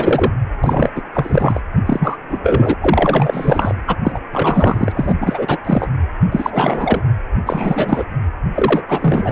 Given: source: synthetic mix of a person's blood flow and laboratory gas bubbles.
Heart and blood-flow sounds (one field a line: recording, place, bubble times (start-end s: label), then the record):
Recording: Doppler ultrasound of blood flow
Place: precordium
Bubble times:
0.00-0.32 s: bubbles
0.64-0.90 s: bubbles
0.96-1.01 s: bubbles
1.12-1.60 s: bubbles
1.85-2.17 s: bubbles
2.30-2.38 s: bubbles
2.43-2.75 s: bubbles
2.81-3.75 s: bubbles
3.87-3.96 s: bubbles
4.04-4.20 s: bubbles
4.32-4.92 s: bubbles
4.95-5.14 s: bubbles
5.21-5.58 s: bubbles
5.64-5.88 s: bubbles
6.32-7.01 s: bubbles
7.46-8.04 s: bubbles
8.54-8.81 s: bubbles
8.88-9.32 s: bubbles
From the record:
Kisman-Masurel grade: 333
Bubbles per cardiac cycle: rolling drumbeat, 9 or more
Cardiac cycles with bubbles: 50 to 99%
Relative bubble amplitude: loud (0.450 to 0.775)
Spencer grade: 3 (all of the cardiac periods contain showers or single bubble signals, but not dominating or overriding the cardiac motion signals)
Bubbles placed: anywhere in the cardiac cycle